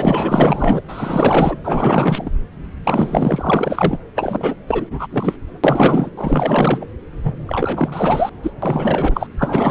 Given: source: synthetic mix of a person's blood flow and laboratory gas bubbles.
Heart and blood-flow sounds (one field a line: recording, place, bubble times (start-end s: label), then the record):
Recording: Doppler ultrasound of blood flow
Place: subclavian vein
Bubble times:
0.00-0.81 s: bubbles
0.88-1.58 s: bubbles
1.63-2.31 s: bubbles
2.83-4.00 s: bubbles
4.16-4.56 s: bubbles
4.67-5.08 s: bubbles
5.11-5.37 s: bubbles
5.64-6.10 s: bubbles
6.17-6.86 s: bubbles
7.24-8.29 s: bubbles
8.42-8.52 s: bubbles
8.62-9.27 s: bubbles
9.37-9.71 s: bubbles
From the record:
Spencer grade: 4 (maximum detectable bubble signal sounding continuously throughout systole and diastole of every cardiac period, and overriding the amplitude of the normal cardiac signals)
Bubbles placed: anywhere in the cardiac cycle